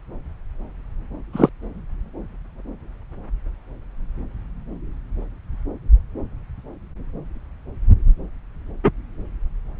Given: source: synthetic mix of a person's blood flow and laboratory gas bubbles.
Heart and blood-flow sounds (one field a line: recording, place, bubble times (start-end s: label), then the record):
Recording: Doppler ultrasound of blood flow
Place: subclavian vein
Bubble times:
1.33-1.49 s: bubbles
8.83-8.91 s: bubbles
From the record:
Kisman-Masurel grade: 123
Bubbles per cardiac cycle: 1 to 2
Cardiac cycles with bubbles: 10 to 50%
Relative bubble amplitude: loud (0.450 to 0.775)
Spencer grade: 2 (many but less than half of the cardiac periods contain bubble signals, singularly or in groups)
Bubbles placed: anywhere in the cardiac cycle